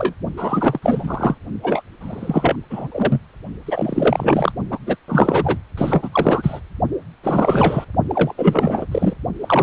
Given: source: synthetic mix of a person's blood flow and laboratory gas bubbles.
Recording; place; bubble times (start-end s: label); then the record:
Doppler ultrasound of blood flow; precordium
0.00-0.14 s: bubbles
0.37-0.80 s: bubbles
0.82-1.35 s: bubbles
1.63-1.81 s: bubbles
2.00-2.56 s: bubbles
2.70-2.88 s: bubbles
2.92-3.19 s: bubbles
3.66-4.52 s: bubbles
4.71-4.78 s: bubbles
4.86-4.96 s: bubbles
5.08-5.58 s: bubbles
5.77-6.60 s: bubbles
7.23-7.85 s: bubbles
8.09-8.34 s: bubbles
8.38-8.86 s: bubbles
8.91-9.13 s: bubbles
9.40-9.63 s: bubbles
From the record:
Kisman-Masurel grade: 333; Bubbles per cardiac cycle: rolling drumbeat, 9 or more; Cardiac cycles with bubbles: 50 to 99%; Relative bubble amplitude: loud (0.450 to 0.775); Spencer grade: 3 (all of the cardiac periods contain showers or single bubble signals, but not dominating or overriding the cardiac motion signals); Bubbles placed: only in the low amplitude regions of the cardiac cycle